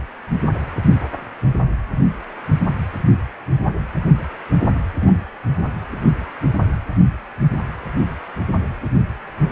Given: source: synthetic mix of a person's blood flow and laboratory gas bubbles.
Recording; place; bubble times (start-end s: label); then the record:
Doppler ultrasound of blood flow; precordium
5.01-5.21 s: bubbles
From the record:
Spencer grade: 1 (occasional bubble signal discernible with the cardiac motion signal, with majority of cardiac periods free of bubbles); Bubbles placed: anywhere in the cardiac cycle